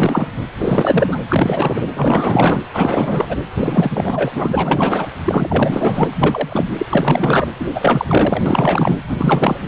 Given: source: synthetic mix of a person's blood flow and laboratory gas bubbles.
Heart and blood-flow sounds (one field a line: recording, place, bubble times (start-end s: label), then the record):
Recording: Doppler ultrasound of blood flow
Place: precordium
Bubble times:
0.00-0.28 s: bubbles
0.59-1.19 s: bubbles
1.29-1.88 s: bubbles
1.94-2.63 s: bubbles
2.73-3.37 s: bubbles
3.54-4.31 s: bubbles
4.35-5.07 s: bubbles
5.25-6.09 s: bubbles
6.22-6.68 s: bubbles
6.78-6.86 s: bubbles
6.90-7.48 s: bubbles
7.59-7.65 s: bubbles
7.75-8.05 s: bubbles
8.08-8.43 s: bubbles
8.46-9.00 s: bubbles
9.07-9.58 s: bubbles
From the record:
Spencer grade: 4 (maximum detectable bubble signal sounding continuously throughout systole and diastole of every cardiac period, and overriding the amplitude of the normal cardiac signals)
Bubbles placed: anywhere in the cardiac cycle